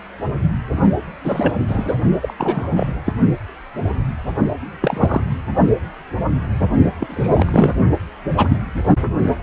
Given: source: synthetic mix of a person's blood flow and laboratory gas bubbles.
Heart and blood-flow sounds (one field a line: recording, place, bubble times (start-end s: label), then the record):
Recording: Doppler ultrasound of blood flow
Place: precordium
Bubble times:
1.24-1.53 s: bubbles
1.68-1.98 s: bubbles
2.22-2.34 s: bubbles
2.38-2.92 s: bubbles
3.04-3.12 s: bubbles
4.82-5.21 s: bubbles
7.00-7.07 s: bubbles
7.09-7.74 s: bubbles
8.36-8.57 s: bubbles
8.87-8.96 s: bubbles
From the record:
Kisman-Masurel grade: 232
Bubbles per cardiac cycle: several, 3 to 8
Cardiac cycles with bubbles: 50 to 99%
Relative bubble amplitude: moderate (0.250 to 0.450)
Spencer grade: 3 (all of the cardiac periods contain showers or single bubble signals, but not dominating or overriding the cardiac motion signals)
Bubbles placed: only in the low amplitude regions of the cardiac cycle